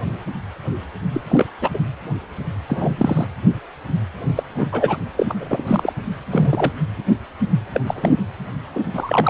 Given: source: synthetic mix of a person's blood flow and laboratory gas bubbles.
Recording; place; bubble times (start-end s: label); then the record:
Doppler ultrasound of blood flow; precordium
1.12-1.21 s: bubbles
1.29-1.46 s: bubbles
1.60-1.70 s: bubbles
1.73-1.79 s: bubbles
2.68-3.27 s: bubbles
4.36-4.43 s: bubbles
4.57-4.68 s: bubbles
4.71-4.96 s: bubbles
5.17-5.34 s: bubbles
5.40-5.64 s: bubbles
5.67-5.93 s: bubbles
6.31-6.72 s: bubbles
7.73-7.81 s: bubbles
7.87-8.17 s: bubbles
8.74-8.80 s: bubbles
8.92-9.30 s: bubbles
From the record:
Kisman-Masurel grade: 232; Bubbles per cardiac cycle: several, 3 to 8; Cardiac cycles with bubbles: 50 to 99%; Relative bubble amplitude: moderate (0.250 to 0.450); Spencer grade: 3 (all of the cardiac periods contain showers or single bubble signals, but not dominating or overriding the cardiac motion signals); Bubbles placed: anywhere in the cardiac cycle